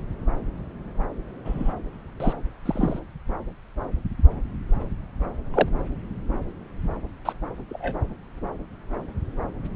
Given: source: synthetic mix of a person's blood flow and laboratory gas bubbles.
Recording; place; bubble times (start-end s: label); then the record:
Doppler ultrasound of blood flow; subclavian vein
1.45-1.74 s: bubbles
2.20-2.34 s: bubbles
2.65-2.99 s: bubbles
5.54-5.68 s: bubbles
7.25-7.33 s: bubbles
7.69-8.03 s: bubbles
From the record:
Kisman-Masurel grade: 123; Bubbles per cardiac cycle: 1 to 2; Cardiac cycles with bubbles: 10 to 50%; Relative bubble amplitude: loud (0.450 to 0.775); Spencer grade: 2 (many but less than half of the cardiac periods contain bubble signals, singularly or in groups); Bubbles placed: anywhere in the cardiac cycle